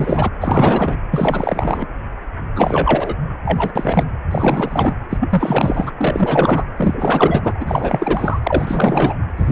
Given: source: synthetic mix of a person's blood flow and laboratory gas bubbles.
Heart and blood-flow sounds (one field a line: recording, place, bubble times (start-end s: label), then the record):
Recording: Doppler ultrasound of blood flow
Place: precordium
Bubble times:
0.00-0.30 s: bubbles
0.41-0.97 s: bubbles
1.11-1.86 s: bubbles
2.55-3.15 s: bubbles
3.44-3.73 s: bubbles
3.75-4.04 s: bubbles
4.30-4.96 s: bubbles
5.09-5.92 s: bubbles
5.97-6.66 s: bubbles
6.76-7.54 s: bubbles
7.59-8.40 s: bubbles
8.43-9.16 s: bubbles
9.37-9.52 s: bubbles
From the record:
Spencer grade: 4 (maximum detectable bubble signal sounding continuously throughout systole and diastole of every cardiac period, and overriding the amplitude of the normal cardiac signals)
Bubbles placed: anywhere in the cardiac cycle